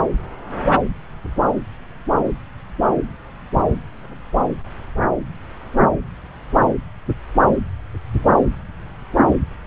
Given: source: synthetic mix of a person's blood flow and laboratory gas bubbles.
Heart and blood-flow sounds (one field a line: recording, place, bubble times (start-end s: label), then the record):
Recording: Doppler ultrasound of blood flow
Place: subclavian vein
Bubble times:
no bubbles
From the record:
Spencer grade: 0 (complete lack of bubble signals)